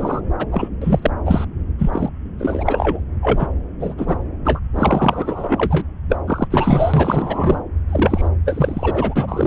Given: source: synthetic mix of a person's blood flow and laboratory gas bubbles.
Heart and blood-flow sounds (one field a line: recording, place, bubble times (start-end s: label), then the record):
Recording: Doppler ultrasound of blood flow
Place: subclavian vein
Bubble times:
0.00-0.21 s: bubbles
0.38-0.46 s: bubbles
0.52-0.69 s: bubbles
0.82-1.11 s: bubbles
1.25-1.45 s: bubbles
1.78-2.10 s: bubbles
2.39-3.00 s: bubbles
3.22-3.47 s: bubbles
3.79-3.95 s: bubbles
3.98-4.17 s: bubbles
4.45-4.60 s: bubbles
4.75-5.82 s: bubbles
6.08-6.17 s: bubbles
6.27-6.48 s: bubbles
6.50-7.62 s: bubbles
7.89-8.28 s: bubbles
8.45-9.46 s: bubbles
From the record:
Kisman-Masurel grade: 343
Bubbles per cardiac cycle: rolling drumbeat, 9 or more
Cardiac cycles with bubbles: 100%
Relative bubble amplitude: loud (0.450 to 0.775)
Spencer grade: 3 (all of the cardiac periods contain showers or single bubble signals, but not dominating or overriding the cardiac motion signals)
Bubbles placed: anywhere in the cardiac cycle